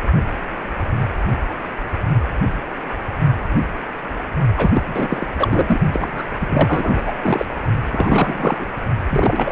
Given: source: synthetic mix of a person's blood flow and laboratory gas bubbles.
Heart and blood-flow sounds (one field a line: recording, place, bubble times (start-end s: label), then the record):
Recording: Doppler ultrasound of blood flow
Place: precordium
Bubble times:
4.57-4.71 s: bubbles
4.73-4.83 s: bubbles
4.87-5.26 s: bubbles
5.39-5.80 s: bubbles
5.92-6.22 s: bubbles
6.39-7.03 s: bubbles
7.06-7.12 s: bubbles
7.21-7.46 s: bubbles
7.91-8.66 s: bubbles
9.10-9.52 s: bubbles
From the record:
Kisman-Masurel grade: 333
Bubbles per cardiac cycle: rolling drumbeat, 9 or more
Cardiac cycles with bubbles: 50 to 99%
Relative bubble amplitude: loud (0.450 to 0.775)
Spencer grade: 3 (all of the cardiac periods contain showers or single bubble signals, but not dominating or overriding the cardiac motion signals)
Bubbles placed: only in the low amplitude regions of the cardiac cycle